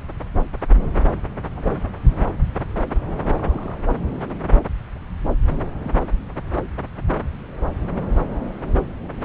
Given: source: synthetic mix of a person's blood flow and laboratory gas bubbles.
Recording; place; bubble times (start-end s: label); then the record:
Doppler ultrasound of blood flow; subclavian vein
1.55-1.79 s: bubbles
2.15-2.23 s: bubbles
3.31-3.78 s: bubbles
5.80-5.96 s: bubbles
From the record:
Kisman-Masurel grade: 121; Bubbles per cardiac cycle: 1 to 2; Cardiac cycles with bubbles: 10 to 50%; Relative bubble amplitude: barely perceptible (0.100 to 0.250); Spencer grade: 2 (many but less than half of the cardiac periods contain bubble signals, singularly or in groups); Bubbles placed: anywhere in the cardiac cycle